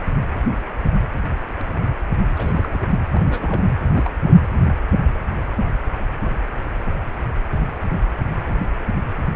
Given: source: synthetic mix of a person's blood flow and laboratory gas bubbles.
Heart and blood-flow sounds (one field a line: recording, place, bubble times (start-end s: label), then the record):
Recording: Doppler ultrasound of blood flow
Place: precordium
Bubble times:
2.34-2.85 s: bubbles
3.12-3.22 s: bubbles
3.28-3.73 s: bubbles
3.90-4.10 s: bubbles
4.25-4.39 s: bubbles
From the record:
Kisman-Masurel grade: 221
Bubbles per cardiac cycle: several, 3 to 8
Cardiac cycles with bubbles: 10 to 50%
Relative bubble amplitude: barely perceptible (0.100 to 0.250)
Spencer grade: 2 (many but less than half of the cardiac periods contain bubble signals, singularly or in groups)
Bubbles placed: anywhere in the cardiac cycle